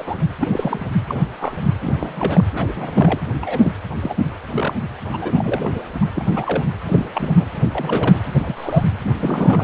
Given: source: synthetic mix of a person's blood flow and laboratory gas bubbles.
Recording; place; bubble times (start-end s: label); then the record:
Doppler ultrasound of blood flow; precordium
0.00-0.15 s: bubbles
0.40-0.86 s: bubbles
1.06-1.25 s: bubbles
1.38-1.58 s: bubbles
1.81-2.44 s: bubbles
2.53-3.19 s: bubbles
3.41-3.72 s: bubbles
4.02-4.14 s: bubbles
4.53-4.75 s: bubbles
5.12-5.18 s: bubbles
5.21-5.83 s: bubbles
6.02-6.05 s: bubbles
6.15-6.25 s: bubbles
6.32-6.65 s: bubbles
6.84-7.10 s: bubbles
7.14-7.49 s: bubbles
7.72-8.20 s: bubbles
8.36-8.85 s: bubbles
8.99-9.64 s: bubbles
From the record:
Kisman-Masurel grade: 242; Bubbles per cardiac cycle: several, 3 to 8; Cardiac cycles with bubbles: 100%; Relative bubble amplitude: moderate (0.250 to 0.450); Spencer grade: 3 (all of the cardiac periods contain showers or single bubble signals, but not dominating or overriding the cardiac motion signals); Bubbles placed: anywhere in the cardiac cycle